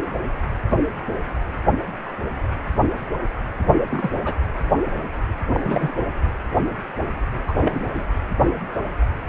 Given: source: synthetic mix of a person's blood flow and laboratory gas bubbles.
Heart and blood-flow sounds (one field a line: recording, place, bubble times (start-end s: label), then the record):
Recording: Doppler ultrasound of blood flow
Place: precordium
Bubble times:
3.91-4.11 s: bubbles
4.25-4.35 s: bubbles
5.53-5.92 s: bubbles
7.47-7.53 s: bubbles
7.57-7.88 s: bubbles
7.95-8.04 s: bubbles
From the record:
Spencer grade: 2 (many but less than half of the cardiac periods contain bubble signals, singularly or in groups)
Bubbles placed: anywhere in the cardiac cycle